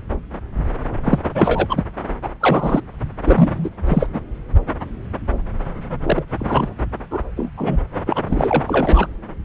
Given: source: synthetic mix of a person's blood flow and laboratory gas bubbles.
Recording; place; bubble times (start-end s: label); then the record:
Doppler ultrasound of blood flow; subclavian vein
1.04-1.19 s: bubbles
1.34-1.84 s: bubbles
2.23-2.29 s: bubbles
2.40-2.81 s: bubbles
3.25-3.70 s: bubbles
3.86-4.08 s: bubbles
4.13-4.20 s: bubbles
6.02-6.23 s: bubbles
6.38-6.68 s: bubbles
7.11-7.21 s: bubbles
7.37-7.50 s: bubbles
7.57-7.82 s: bubbles
8.06-8.21 s: bubbles
8.27-9.06 s: bubbles
From the record:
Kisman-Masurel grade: 233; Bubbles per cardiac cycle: several, 3 to 8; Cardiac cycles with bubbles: 50 to 99%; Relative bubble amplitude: loud (0.450 to 0.775); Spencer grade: 3 (all of the cardiac periods contain showers or single bubble signals, but not dominating or overriding the cardiac motion signals); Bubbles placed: anywhere in the cardiac cycle